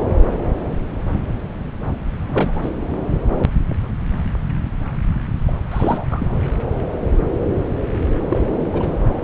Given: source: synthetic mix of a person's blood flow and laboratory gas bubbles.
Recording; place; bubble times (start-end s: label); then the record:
Doppler ultrasound of blood flow; subclavian vein
2.27-2.73 s: bubbles
5.47-5.52 s: bubbles
5.71-6.04 s: bubbles
6.11-6.29 s: bubbles
8.30-8.46 s: bubbles
8.58-8.70 s: bubbles
8.73-8.96 s: bubbles
From the record:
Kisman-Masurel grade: 222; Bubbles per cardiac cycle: several, 3 to 8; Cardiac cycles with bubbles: 10 to 50%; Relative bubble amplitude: moderate (0.250 to 0.450); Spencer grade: 2 (many but less than half of the cardiac periods contain bubble signals, singularly or in groups); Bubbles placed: anywhere in the cardiac cycle